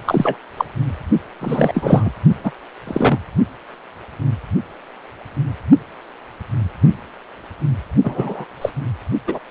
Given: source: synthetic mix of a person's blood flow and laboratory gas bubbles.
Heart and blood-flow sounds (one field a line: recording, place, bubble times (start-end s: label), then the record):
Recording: Doppler ultrasound of blood flow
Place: precordium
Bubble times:
0.05-0.37 s: bubbles
0.57-0.65 s: bubbles
1.40-2.11 s: bubbles
2.43-2.51 s: bubbles
2.87-3.19 s: bubbles
8.04-8.45 s: bubbles
8.61-8.70 s: bubbles
9.27-9.39 s: bubbles
From the record:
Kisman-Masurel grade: 233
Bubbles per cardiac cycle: several, 3 to 8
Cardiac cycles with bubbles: 50 to 99%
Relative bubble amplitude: loud (0.450 to 0.775)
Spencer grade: 3 (all of the cardiac periods contain showers or single bubble signals, but not dominating or overriding the cardiac motion signals)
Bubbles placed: only in the low amplitude regions of the cardiac cycle